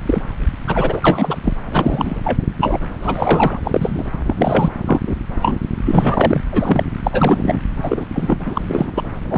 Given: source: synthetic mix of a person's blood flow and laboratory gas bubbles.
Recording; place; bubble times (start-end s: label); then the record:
Doppler ultrasound of blood flow; subclavian vein
0.05-0.23 s: bubbles
0.66-1.38 s: bubbles
1.44-1.53 s: bubbles
1.71-2.20 s: bubbles
2.23-2.39 s: bubbles
2.60-2.79 s: bubbles
3.02-3.58 s: bubbles
3.63-4.05 s: bubbles
4.27-4.69 s: bubbles
4.86-5.01 s: bubbles
5.06-5.15 s: bubbles
5.42-5.59 s: bubbles
5.85-6.42 s: bubbles
6.51-6.85 s: bubbles
7.03-7.58 s: bubbles
7.82-8.05 s: bubbles
8.14-8.37 s: bubbles
8.46-8.91 s: bubbles
8.96-9.03 s: bubbles
9.30-9.38 s: bubbles
From the record:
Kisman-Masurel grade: 243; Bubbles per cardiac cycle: several, 3 to 8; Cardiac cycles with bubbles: 100%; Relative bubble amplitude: loud (0.450 to 0.775); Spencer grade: 3 (all of the cardiac periods contain showers or single bubble signals, but not dominating or overriding the cardiac motion signals); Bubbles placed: anywhere in the cardiac cycle